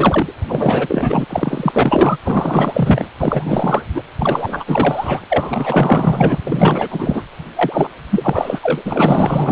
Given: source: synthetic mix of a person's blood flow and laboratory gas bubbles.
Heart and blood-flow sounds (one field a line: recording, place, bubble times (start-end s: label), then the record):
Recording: Doppler ultrasound of blood flow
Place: precordium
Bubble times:
0.00-0.33 s: bubbles
0.47-1.25 s: bubbles
1.29-2.17 s: bubbles
2.24-3.08 s: bubbles
3.19-3.82 s: bubbles
3.94-4.02 s: bubbles
4.19-4.64 s: bubbles
4.67-5.20 s: bubbles
5.29-6.38 s: bubbles
6.46-7.23 s: bubbles
7.55-7.89 s: bubbles
8.10-8.59 s: bubbles
8.63-8.82 s: bubbles
8.85-9.52 s: bubbles
From the record:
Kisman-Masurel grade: 444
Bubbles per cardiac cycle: continuous sound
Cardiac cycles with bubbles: 100%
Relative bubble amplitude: maximal (0.775 to 0.999)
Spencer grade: 4 (maximum detectable bubble signal sounding continuously throughout systole and diastole of every cardiac period, and overriding the amplitude of the normal cardiac signals)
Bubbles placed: anywhere in the cardiac cycle